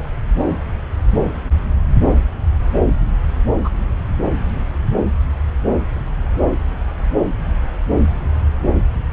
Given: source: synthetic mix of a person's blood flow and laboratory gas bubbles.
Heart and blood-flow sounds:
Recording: Doppler ultrasound of blood flow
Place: subclavian vein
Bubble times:
3.64-3.70 s: bubbles
From the record:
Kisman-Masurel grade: 113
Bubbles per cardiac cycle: 1 to 2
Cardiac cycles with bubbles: 1 to 10%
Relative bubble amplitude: loud (0.450 to 0.775)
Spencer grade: 1 (occasional bubble signal discernible with the cardiac motion signal, with majority of cardiac periods free of bubbles)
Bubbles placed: anywhere in the cardiac cycle

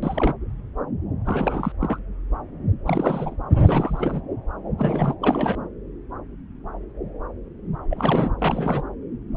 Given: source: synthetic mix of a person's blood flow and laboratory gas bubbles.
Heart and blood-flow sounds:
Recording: Doppler ultrasound of blood flow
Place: subclavian vein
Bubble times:
0.00-0.34 s: bubbles
1.25-1.72 s: bubbles
1.81-1.99 s: bubbles
2.85-3.37 s: bubbles
3.52-4.22 s: bubbles
4.79-5.14 s: bubbles
5.21-5.55 s: bubbles
7.90-8.31 s: bubbles
8.38-8.82 s: bubbles
From the record:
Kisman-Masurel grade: 332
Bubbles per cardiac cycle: rolling drumbeat, 9 or more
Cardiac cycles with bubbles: 50 to 99%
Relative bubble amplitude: moderate (0.250 to 0.450)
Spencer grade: 3 (all of the cardiac periods contain showers or single bubble signals, but not dominating or overriding the cardiac motion signals)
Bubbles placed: anywhere in the cardiac cycle

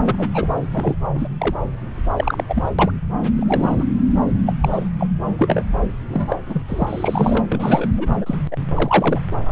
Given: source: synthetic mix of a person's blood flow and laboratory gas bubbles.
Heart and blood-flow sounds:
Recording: Doppler ultrasound of blood flow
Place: subclavian vein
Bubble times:
0.05-0.29 s: bubbles
0.34-0.48 s: bubbles
0.71-1.06 s: bubbles
1.15-1.27 s: bubbles
1.38-1.64 s: bubbles
2.15-2.44 s: bubbles
2.48-2.71 s: bubbles
2.79-2.92 s: bubbles
3.35-3.85 s: bubbles
4.46-4.55 s: bubbles
4.61-4.89 s: bubbles
4.97-5.07 s: bubbles
5.38-5.62 s: bubbles
6.09-6.38 s: bubbles
6.46-6.62 s: bubbles
6.68-7.45 s: bubbles
7.49-7.87 s: bubbles
7.97-8.07 s: bubbles
8.21-8.36 s: bubbles
8.51-8.57 s: bubbles
8.74-9.21 s: bubbles
From the record:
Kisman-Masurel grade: 243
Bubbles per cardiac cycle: several, 3 to 8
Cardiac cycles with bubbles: 100%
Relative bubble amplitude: loud (0.450 to 0.775)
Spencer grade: 3 (all of the cardiac periods contain showers or single bubble signals, but not dominating or overriding the cardiac motion signals)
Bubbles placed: anywhere in the cardiac cycle

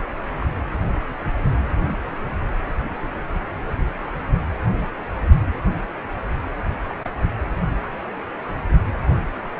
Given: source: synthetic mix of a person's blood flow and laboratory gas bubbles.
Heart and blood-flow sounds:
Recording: Doppler ultrasound of blood flow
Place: precordium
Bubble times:
0.41-0.46 s: bubbles
1.69-1.98 s: bubbles
6.89-6.95 s: bubbles
7.05-7.09 s: bubbles
From the record:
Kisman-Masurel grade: 121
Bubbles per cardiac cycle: 1 to 2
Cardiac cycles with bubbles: 10 to 50%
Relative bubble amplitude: barely perceptible (0.100 to 0.250)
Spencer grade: 2 (many but less than half of the cardiac periods contain bubble signals, singularly or in groups)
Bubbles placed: anywhere in the cardiac cycle

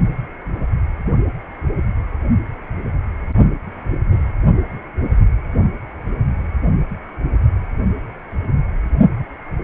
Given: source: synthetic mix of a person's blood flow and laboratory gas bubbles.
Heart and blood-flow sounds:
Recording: Doppler ultrasound of blood flow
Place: precordium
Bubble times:
no bubbles
From the record:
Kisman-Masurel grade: 000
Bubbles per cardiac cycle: 0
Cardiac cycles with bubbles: 0%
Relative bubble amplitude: no bubbles discernible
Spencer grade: 0 (complete lack of bubble signals)

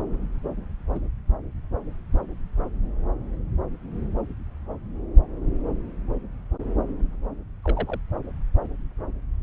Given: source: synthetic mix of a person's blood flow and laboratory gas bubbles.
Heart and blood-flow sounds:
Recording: Doppler ultrasound of blood flow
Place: subclavian vein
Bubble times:
0.93-1.00 s: bubbles
7.64-7.99 s: bubbles
From the record:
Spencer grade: 2 (many but less than half of the cardiac periods contain bubble signals, singularly or in groups)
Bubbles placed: anywhere in the cardiac cycle

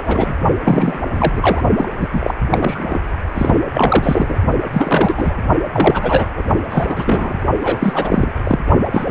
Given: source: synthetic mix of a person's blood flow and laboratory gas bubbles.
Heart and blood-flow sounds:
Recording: Doppler ultrasound of blood flow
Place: precordium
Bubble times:
0.00-0.35 s: bubbles
0.64-0.98 s: bubbles
1.14-1.63 s: bubbles
1.78-1.89 s: bubbles
2.00-2.08 s: bubbles
2.12-2.34 s: bubbles
2.51-3.01 s: bubbles
3.33-3.59 s: bubbles
3.72-4.36 s: bubbles
4.72-5.34 s: bubbles
5.72-6.27 s: bubbles
6.36-6.43 s: bubbles
6.71-7.40 s: bubbles
7.60-8.31 s: bubbles
8.44-8.59 s: bubbles
8.91-9.11 s: bubbles
From the record:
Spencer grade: 3 (all of the cardiac periods contain showers or single bubble signals, but not dominating or overriding the cardiac motion signals)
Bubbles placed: only in the low amplitude regions of the cardiac cycle

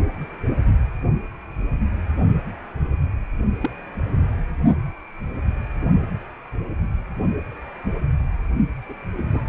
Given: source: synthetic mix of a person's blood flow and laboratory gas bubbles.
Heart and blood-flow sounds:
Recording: Doppler ultrasound of blood flow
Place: precordium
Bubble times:
3.60-3.70 s: bubbles
8.88-8.94 s: bubbles
9.17-9.49 s: bubbles
From the record:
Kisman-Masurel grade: 121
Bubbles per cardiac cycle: 1 to 2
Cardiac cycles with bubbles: 10 to 50%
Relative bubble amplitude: barely perceptible (0.100 to 0.250)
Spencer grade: 2 (many but less than half of the cardiac periods contain bubble signals, singularly or in groups)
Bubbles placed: only in the low amplitude regions of the cardiac cycle

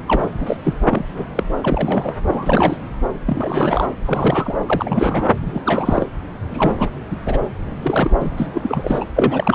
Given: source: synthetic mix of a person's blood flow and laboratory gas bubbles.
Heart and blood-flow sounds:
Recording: Doppler ultrasound of blood flow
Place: subclavian vein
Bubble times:
0.03-0.29 s: bubbles
0.40-0.56 s: bubbles
0.64-0.74 s: bubbles
0.89-1.05 s: bubbles
1.16-1.26 s: bubbles
1.35-1.44 s: bubbles
1.62-2.15 s: bubbles
2.28-2.77 s: bubbles
3.25-3.87 s: bubbles
4.05-4.55 s: bubbles
4.66-5.31 s: bubbles
5.42-5.62 s: bubbles
5.65-6.09 s: bubbles
6.51-6.90 s: bubbles
7.11-7.18 s: bubbles
7.25-7.38 s: bubbles
7.82-8.11 s: bubbles
8.20-8.30 s: bubbles
8.37-8.46 s: bubbles
8.53-9.05 s: bubbles
9.16-9.55 s: bubbles
From the record:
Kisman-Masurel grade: 342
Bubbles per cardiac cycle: rolling drumbeat, 9 or more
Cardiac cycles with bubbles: 100%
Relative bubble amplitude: moderate (0.250 to 0.450)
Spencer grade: 3 (all of the cardiac periods contain showers or single bubble signals, but not dominating or overriding the cardiac motion signals)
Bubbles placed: anywhere in the cardiac cycle

